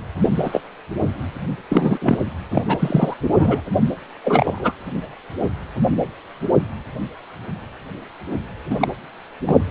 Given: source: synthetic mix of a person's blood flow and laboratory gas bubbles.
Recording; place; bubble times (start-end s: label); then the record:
Doppler ultrasound of blood flow; precordium
0.22-0.30 s: bubbles
0.38-0.60 s: bubbles
1.71-1.98 s: bubbles
2.02-2.21 s: bubbles
2.51-2.62 s: bubbles
2.67-2.77 s: bubbles
2.79-3.14 s: bubbles
3.19-3.61 s: bubbles
4.24-4.72 s: bubbles
8.70-8.74 s: bubbles
8.80-8.88 s: bubbles
9.46-9.64 s: bubbles
From the record:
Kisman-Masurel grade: 233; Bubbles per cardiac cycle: several, 3 to 8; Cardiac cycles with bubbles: 50 to 99%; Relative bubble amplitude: loud (0.450 to 0.775); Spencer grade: 3 (all of the cardiac periods contain showers or single bubble signals, but not dominating or overriding the cardiac motion signals); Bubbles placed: anywhere in the cardiac cycle